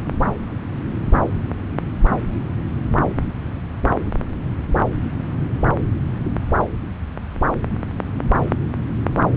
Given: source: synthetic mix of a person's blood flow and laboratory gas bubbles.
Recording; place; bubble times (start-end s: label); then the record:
Doppler ultrasound of blood flow; subclavian vein
no bubbles
From the record:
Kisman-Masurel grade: 000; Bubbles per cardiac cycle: 0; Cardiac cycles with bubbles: 0%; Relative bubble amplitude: no bubbles discernible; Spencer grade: 0 (complete lack of bubble signals)